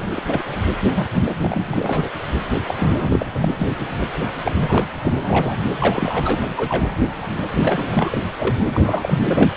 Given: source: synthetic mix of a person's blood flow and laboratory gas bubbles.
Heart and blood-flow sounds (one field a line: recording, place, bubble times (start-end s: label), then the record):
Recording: Doppler ultrasound of blood flow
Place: precordium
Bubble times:
0.00-0.22 s: bubbles
0.26-0.45 s: bubbles
0.94-1.07 s: bubbles
1.25-1.34 s: bubbles
1.41-2.10 s: bubbles
2.53-2.62 s: bubbles
2.67-3.26 s: bubbles
3.35-3.55 s: bubbles
3.58-3.68 s: bubbles
3.70-3.76 s: bubbles
4.43-4.52 s: bubbles
4.56-4.88 s: bubbles
5.02-5.57 s: bubbles
5.79-6.48 s: bubbles
6.56-6.88 s: bubbles
7.21-7.27 s: bubbles
7.51-8.18 s: bubbles
8.38-8.55 s: bubbles
8.66-9.18 s: bubbles
9.24-9.52 s: bubbles
From the record:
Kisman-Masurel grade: 342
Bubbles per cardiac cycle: rolling drumbeat, 9 or more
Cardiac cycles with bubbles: 100%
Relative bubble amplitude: moderate (0.250 to 0.450)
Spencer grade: 3 (all of the cardiac periods contain showers or single bubble signals, but not dominating or overriding the cardiac motion signals)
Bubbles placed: anywhere in the cardiac cycle